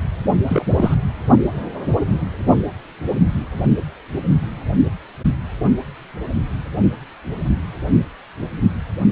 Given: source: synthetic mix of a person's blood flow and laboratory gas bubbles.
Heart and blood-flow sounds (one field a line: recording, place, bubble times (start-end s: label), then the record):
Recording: Doppler ultrasound of blood flow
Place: precordium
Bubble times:
0.47-0.65 s: bubbles
0.77-0.95 s: bubbles
From the record:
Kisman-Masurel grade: 212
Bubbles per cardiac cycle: several, 3 to 8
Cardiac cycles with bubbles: 1 to 10%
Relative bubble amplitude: moderate (0.250 to 0.450)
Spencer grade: 1 (occasional bubble signal discernible with the cardiac motion signal, with majority of cardiac periods free of bubbles)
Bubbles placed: only in the low amplitude regions of the cardiac cycle